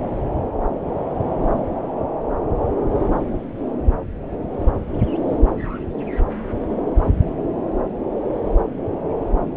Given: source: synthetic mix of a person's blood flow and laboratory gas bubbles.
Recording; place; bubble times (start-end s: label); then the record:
Doppler ultrasound of blood flow; subclavian vein
no bubbles
From the record:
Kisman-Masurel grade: 000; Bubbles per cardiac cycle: 0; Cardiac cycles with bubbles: 0%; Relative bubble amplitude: no bubbles discernible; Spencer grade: 0 (complete lack of bubble signals)